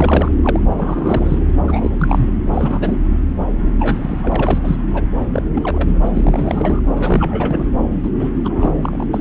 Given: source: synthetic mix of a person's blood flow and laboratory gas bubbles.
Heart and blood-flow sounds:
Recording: Doppler ultrasound of blood flow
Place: subclavian vein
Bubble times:
0.00-0.30 s: bubbles
0.42-0.60 s: bubbles
0.77-1.44 s: bubbles
1.65-2.29 s: bubbles
2.52-2.97 s: bubbles
3.79-4.60 s: bubbles
4.64-4.76 s: bubbles
4.93-5.04 s: bubbles
5.32-5.43 s: bubbles
5.54-6.08 s: bubbles
6.14-6.81 s: bubbles
6.96-7.66 s: bubbles
8.03-8.11 s: bubbles
8.19-8.30 s: bubbles
8.45-8.78 s: bubbles
8.81-9.06 s: bubbles
9.13-9.21 s: bubbles
From the record:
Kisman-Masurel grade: 342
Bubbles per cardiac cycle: rolling drumbeat, 9 or more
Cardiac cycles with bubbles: 100%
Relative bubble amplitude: moderate (0.250 to 0.450)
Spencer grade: 3 (all of the cardiac periods contain showers or single bubble signals, but not dominating or overriding the cardiac motion signals)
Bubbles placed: anywhere in the cardiac cycle

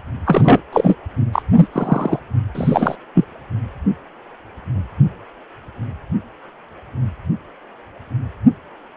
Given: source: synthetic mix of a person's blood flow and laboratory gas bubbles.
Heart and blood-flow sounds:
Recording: Doppler ultrasound of blood flow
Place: precordium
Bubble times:
0.26-0.60 s: bubbles
0.73-0.95 s: bubbles
1.32-1.42 s: bubbles
1.55-1.68 s: bubbles
1.72-2.20 s: bubbles
2.55-2.96 s: bubbles
3.14-3.25 s: bubbles
From the record:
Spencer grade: 2 (many but less than half of the cardiac periods contain bubble signals, singularly or in groups)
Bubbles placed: anywhere in the cardiac cycle

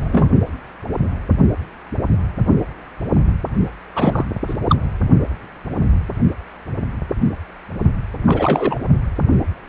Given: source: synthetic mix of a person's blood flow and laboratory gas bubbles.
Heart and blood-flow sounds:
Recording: Doppler ultrasound of blood flow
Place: precordium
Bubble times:
0.00-0.29 s: bubbles
3.95-4.24 s: bubbles
4.47-4.54 s: bubbles
4.68-4.76 s: bubbles
8.25-8.78 s: bubbles
From the record:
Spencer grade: 2 (many but less than half of the cardiac periods contain bubble signals, singularly or in groups)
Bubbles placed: only in the low amplitude regions of the cardiac cycle

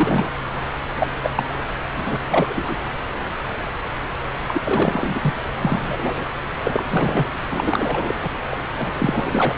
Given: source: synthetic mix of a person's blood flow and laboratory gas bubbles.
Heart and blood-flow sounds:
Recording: Doppler ultrasound of blood flow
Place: subclavian vein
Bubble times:
0.00-0.29 s: bubbles
0.98-1.07 s: bubbles
1.22-1.30 s: bubbles
1.35-1.44 s: bubbles
1.97-2.17 s: bubbles
2.29-2.76 s: bubbles
4.48-4.61 s: bubbles
4.64-5.35 s: bubbles
5.61-6.30 s: bubbles
6.63-6.84 s: bubbles
6.89-7.28 s: bubbles
7.49-8.15 s: bubbles
8.22-8.30 s: bubbles
8.51-8.58 s: bubbles
8.78-8.93 s: bubbles
8.98-9.55 s: bubbles
From the record:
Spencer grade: 3 (all of the cardiac periods contain showers or single bubble signals, but not dominating or overriding the cardiac motion signals)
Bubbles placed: anywhere in the cardiac cycle

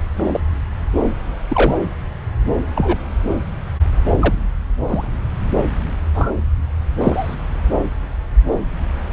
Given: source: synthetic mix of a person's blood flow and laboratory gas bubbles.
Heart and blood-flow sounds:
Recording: Doppler ultrasound of blood flow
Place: subclavian vein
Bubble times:
0.16-0.40 s: bubbles
1.48-1.78 s: bubbles
2.75-2.98 s: bubbles
4.20-4.33 s: bubbles
4.88-5.08 s: bubbles
6.14-6.30 s: bubbles
7.00-7.35 s: bubbles
From the record:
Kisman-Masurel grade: 122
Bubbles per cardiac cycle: 1 to 2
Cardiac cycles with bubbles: 10 to 50%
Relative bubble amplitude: moderate (0.250 to 0.450)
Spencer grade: 2 (many but less than half of the cardiac periods contain bubble signals, singularly or in groups)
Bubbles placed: anywhere in the cardiac cycle

